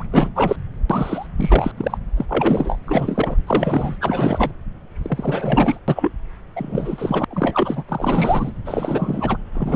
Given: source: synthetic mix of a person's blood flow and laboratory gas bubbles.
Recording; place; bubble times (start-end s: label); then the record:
Doppler ultrasound of blood flow; subclavian vein
0.00-0.04 s: bubbles
0.11-0.28 s: bubbles
0.35-0.56 s: bubbles
0.90-1.27 s: bubbles
1.37-1.71 s: bubbles
1.77-1.98 s: bubbles
2.17-2.25 s: bubbles
2.29-2.79 s: bubbles
2.85-3.42 s: bubbles
3.46-3.97 s: bubbles
4.01-4.52 s: bubbles
5.02-5.79 s: bubbles
5.88-6.12 s: bubbles
6.56-7.25 s: bubbles
7.30-7.83 s: bubbles
7.89-8.51 s: bubbles
8.65-9.37 s: bubbles
9.54-9.76 s: bubbles
From the record:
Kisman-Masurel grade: 343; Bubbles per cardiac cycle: rolling drumbeat, 9 or more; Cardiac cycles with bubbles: 100%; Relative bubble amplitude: loud (0.450 to 0.775); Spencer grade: 3 (all of the cardiac periods contain showers or single bubble signals, but not dominating or overriding the cardiac motion signals); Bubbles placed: anywhere in the cardiac cycle